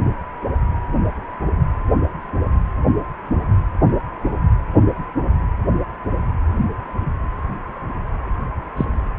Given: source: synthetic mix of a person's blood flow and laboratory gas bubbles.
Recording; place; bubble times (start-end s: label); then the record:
Doppler ultrasound of blood flow; precordium
8.76-8.85 s: bubbles
From the record:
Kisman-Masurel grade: 122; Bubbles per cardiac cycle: 1 to 2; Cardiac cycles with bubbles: 10 to 50%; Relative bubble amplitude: moderate (0.250 to 0.450); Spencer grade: 2 (many but less than half of the cardiac periods contain bubble signals, singularly or in groups); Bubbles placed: anywhere in the cardiac cycle